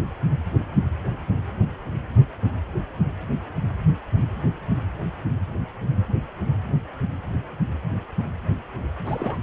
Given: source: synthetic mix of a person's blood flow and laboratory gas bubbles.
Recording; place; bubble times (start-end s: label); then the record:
Doppler ultrasound of blood flow; precordium
9.05-9.38 s: bubbles
From the record:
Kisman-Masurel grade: 211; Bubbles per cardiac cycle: several, 3 to 8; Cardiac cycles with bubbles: 1 to 10%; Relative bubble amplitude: barely perceptible (0.100 to 0.250); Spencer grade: 1 (occasional bubble signal discernible with the cardiac motion signal, with majority of cardiac periods free of bubbles); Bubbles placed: anywhere in the cardiac cycle